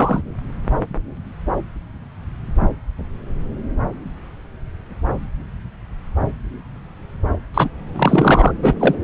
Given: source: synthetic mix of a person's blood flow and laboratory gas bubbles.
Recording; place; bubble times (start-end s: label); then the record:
Doppler ultrasound of blood flow; subclavian vein
0.00-0.21 s: bubbles
7.54-7.69 s: bubbles
7.96-8.52 s: bubbles
8.62-8.75 s: bubbles
8.79-8.95 s: bubbles
From the record:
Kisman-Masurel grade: 223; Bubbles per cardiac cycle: several, 3 to 8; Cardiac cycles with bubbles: 10 to 50%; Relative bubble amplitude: loud (0.450 to 0.775); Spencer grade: 2 (many but less than half of the cardiac periods contain bubble signals, singularly or in groups); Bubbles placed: anywhere in the cardiac cycle